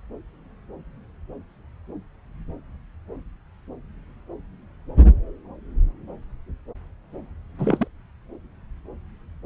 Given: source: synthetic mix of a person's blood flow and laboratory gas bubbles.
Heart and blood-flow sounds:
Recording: Doppler ultrasound of blood flow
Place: subclavian vein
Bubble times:
7.58-7.88 s: bubbles
From the record:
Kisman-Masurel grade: 211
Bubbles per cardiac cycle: several, 3 to 8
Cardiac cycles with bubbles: 1 to 10%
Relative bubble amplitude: barely perceptible (0.100 to 0.250)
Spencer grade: 1 (occasional bubble signal discernible with the cardiac motion signal, with majority of cardiac periods free of bubbles)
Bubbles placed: anywhere in the cardiac cycle

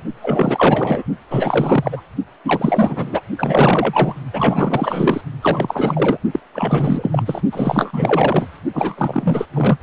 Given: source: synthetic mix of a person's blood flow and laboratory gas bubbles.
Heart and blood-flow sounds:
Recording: Doppler ultrasound of blood flow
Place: precordium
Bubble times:
0.00-0.04 s: bubbles
0.22-1.02 s: bubbles
1.30-2.02 s: bubbles
2.44-3.22 s: bubbles
3.38-4.16 s: bubbles
4.33-5.21 s: bubbles
5.41-6.18 s: bubbles
6.33-6.40 s: bubbles
6.53-7.41 s: bubbles
7.52-8.46 s: bubbles
8.73-8.95 s: bubbles
8.97-9.46 s: bubbles
9.54-9.77 s: bubbles
From the record:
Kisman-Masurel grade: 444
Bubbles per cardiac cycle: continuous sound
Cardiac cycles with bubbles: 100%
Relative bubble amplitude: maximal (0.775 to 0.999)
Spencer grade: 4 (maximum detectable bubble signal sounding continuously throughout systole and diastole of every cardiac period, and overriding the amplitude of the normal cardiac signals)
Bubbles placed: only in the low amplitude regions of the cardiac cycle

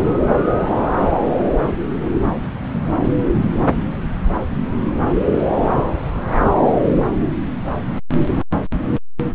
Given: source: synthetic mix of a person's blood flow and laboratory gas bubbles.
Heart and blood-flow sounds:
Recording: Doppler ultrasound of blood flow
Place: subclavian vein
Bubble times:
0.55-0.64 s: bubbles
From the record:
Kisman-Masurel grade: 121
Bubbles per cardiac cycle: 1 to 2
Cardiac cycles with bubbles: 10 to 50%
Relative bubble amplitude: barely perceptible (0.100 to 0.250)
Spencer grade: 2 (many but less than half of the cardiac periods contain bubble signals, singularly or in groups)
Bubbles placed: anywhere in the cardiac cycle

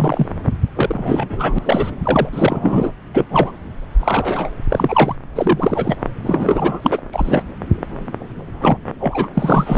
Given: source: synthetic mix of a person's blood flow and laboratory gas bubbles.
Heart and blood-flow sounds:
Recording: Doppler ultrasound of blood flow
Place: subclavian vein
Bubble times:
0.00-0.26 s: bubbles
0.75-1.58 s: bubbles
1.61-1.91 s: bubbles
2.04-2.29 s: bubbles
2.33-2.93 s: bubbles
3.13-3.25 s: bubbles
3.29-3.52 s: bubbles
4.00-4.50 s: bubbles
4.69-5.15 s: bubbles
5.35-5.96 s: bubbles
6.23-7.02 s: bubbles
7.12-7.42 s: bubbles
8.60-8.78 s: bubbles
9.00-9.28 s: bubbles
9.34-9.78 s: bubbles
From the record:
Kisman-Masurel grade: 233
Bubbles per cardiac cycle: several, 3 to 8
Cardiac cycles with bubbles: 50 to 99%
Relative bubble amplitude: loud (0.450 to 0.775)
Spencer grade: 3 (all of the cardiac periods contain showers or single bubble signals, but not dominating or overriding the cardiac motion signals)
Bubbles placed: anywhere in the cardiac cycle

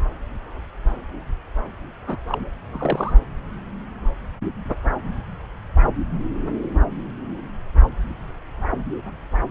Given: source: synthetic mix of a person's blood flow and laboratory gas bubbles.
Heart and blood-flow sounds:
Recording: Doppler ultrasound of blood flow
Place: subclavian vein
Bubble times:
2.07-2.16 s: bubbles
2.27-2.50 s: bubbles
2.71-3.13 s: bubbles
From the record:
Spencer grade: 1 (occasional bubble signal discernible with the cardiac motion signal, with majority of cardiac periods free of bubbles)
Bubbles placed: anywhere in the cardiac cycle

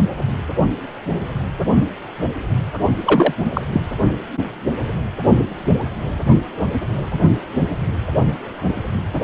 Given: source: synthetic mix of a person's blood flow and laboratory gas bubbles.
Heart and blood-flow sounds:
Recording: Doppler ultrasound of blood flow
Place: precordium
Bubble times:
3.05-3.33 s: bubbles
3.54-3.61 s: bubbles
3.73-3.81 s: bubbles
From the record:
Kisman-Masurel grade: 213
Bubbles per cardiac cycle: several, 3 to 8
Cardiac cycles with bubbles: 1 to 10%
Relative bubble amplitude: loud (0.450 to 0.775)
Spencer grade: 1 (occasional bubble signal discernible with the cardiac motion signal, with majority of cardiac periods free of bubbles)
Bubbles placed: only in the low amplitude regions of the cardiac cycle

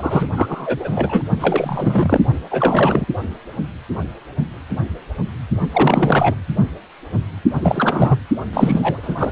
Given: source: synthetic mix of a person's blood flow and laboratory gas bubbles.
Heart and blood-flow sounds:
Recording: Doppler ultrasound of blood flow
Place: precordium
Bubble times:
0.00-0.27 s: bubbles
0.36-1.23 s: bubbles
1.39-2.21 s: bubbles
2.50-3.05 s: bubbles
5.72-6.34 s: bubbles
7.60-8.20 s: bubbles
8.53-9.32 s: bubbles
From the record:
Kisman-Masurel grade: 333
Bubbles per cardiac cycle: rolling drumbeat, 9 or more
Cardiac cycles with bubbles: 50 to 99%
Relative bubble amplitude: loud (0.450 to 0.775)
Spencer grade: 3 (all of the cardiac periods contain showers or single bubble signals, but not dominating or overriding the cardiac motion signals)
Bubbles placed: only in the low amplitude regions of the cardiac cycle

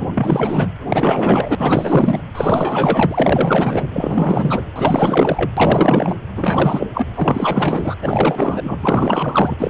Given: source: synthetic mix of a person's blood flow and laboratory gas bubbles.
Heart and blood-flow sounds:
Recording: Doppler ultrasound of blood flow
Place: precordium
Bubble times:
0.00-0.05 s: bubbles
0.14-0.68 s: bubbles
0.88-1.55 s: bubbles
1.58-2.22 s: bubbles
2.35-3.89 s: bubbles
3.93-4.63 s: bubbles
4.75-5.51 s: bubbles
5.57-6.16 s: bubbles
6.37-6.87 s: bubbles
6.94-7.07 s: bubbles
7.15-7.95 s: bubbles
8.01-9.55 s: bubbles
9.59-9.70 s: bubbles
From the record:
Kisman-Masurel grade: 444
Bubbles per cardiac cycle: continuous sound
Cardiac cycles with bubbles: 100%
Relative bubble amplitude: maximal (0.775 to 0.999)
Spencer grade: 4 (maximum detectable bubble signal sounding continuously throughout systole and diastole of every cardiac period, and overriding the amplitude of the normal cardiac signals)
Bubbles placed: anywhere in the cardiac cycle

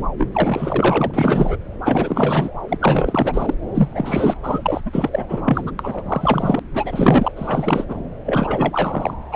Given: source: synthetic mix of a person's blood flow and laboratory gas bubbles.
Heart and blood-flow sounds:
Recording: Doppler ultrasound of blood flow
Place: subclavian vein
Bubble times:
0.18-0.27 s: bubbles
0.33-1.56 s: bubbles
1.85-2.50 s: bubbles
2.68-3.54 s: bubbles
3.74-4.37 s: bubbles
4.43-4.81 s: bubbles
4.85-5.10 s: bubbles
5.12-5.26 s: bubbles
5.29-5.42 s: bubbles
5.45-5.71 s: bubbles
5.79-6.03 s: bubbles
6.06-6.60 s: bubbles
6.74-7.32 s: bubbles
7.36-7.86 s: bubbles
7.89-7.98 s: bubbles
8.25-9.14 s: bubbles
9.31-9.36 s: bubbles
From the record:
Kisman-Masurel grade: 444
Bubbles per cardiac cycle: continuous sound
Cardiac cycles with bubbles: 100%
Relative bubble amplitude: maximal (0.775 to 0.999)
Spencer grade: 4 (maximum detectable bubble signal sounding continuously throughout systole and diastole of every cardiac period, and overriding the amplitude of the normal cardiac signals)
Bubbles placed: anywhere in the cardiac cycle

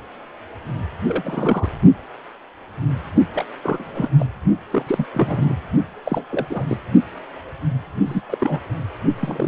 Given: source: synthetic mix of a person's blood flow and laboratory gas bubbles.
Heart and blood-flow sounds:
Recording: Doppler ultrasound of blood flow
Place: precordium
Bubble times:
1.06-1.69 s: bubbles
3.34-3.45 s: bubbles
3.62-4.10 s: bubbles
4.18-4.27 s: bubbles
4.71-5.06 s: bubbles
5.14-5.54 s: bubbles
6.05-6.26 s: bubbles
6.30-6.47 s: bubbles
6.50-6.78 s: bubbles
8.05-8.21 s: bubbles
8.29-8.62 s: bubbles
9.21-9.48 s: bubbles
From the record:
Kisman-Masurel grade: 232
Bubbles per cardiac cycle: several, 3 to 8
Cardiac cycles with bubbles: 50 to 99%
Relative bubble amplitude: moderate (0.250 to 0.450)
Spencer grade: 3 (all of the cardiac periods contain showers or single bubble signals, but not dominating or overriding the cardiac motion signals)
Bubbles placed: only in the low amplitude regions of the cardiac cycle

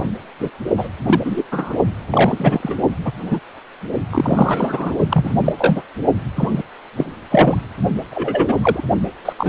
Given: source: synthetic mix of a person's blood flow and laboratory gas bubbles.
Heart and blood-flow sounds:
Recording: Doppler ultrasound of blood flow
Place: precordium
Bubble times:
0.00-0.06 s: bubbles
0.40-0.49 s: bubbles
0.77-0.88 s: bubbles
1.07-1.19 s: bubbles
1.24-1.43 s: bubbles
1.51-1.76 s: bubbles
2.10-2.76 s: bubbles
3.04-3.12 s: bubbles
3.26-3.40 s: bubbles
4.09-4.96 s: bubbles
5.09-5.42 s: bubbles
5.44-5.52 s: bubbles
5.57-5.82 s: bubbles
6.36-6.62 s: bubbles
6.96-7.06 s: bubbles
7.30-7.62 s: bubbles
8.11-8.54 s: bubbles
8.61-8.84 s: bubbles
9.25-9.33 s: bubbles
9.38-9.49 s: bubbles
From the record:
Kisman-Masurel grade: 243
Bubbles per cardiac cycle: several, 3 to 8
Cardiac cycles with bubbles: 100%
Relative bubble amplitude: loud (0.450 to 0.775)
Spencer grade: 3 (all of the cardiac periods contain showers or single bubble signals, but not dominating or overriding the cardiac motion signals)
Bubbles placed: only in the low amplitude regions of the cardiac cycle

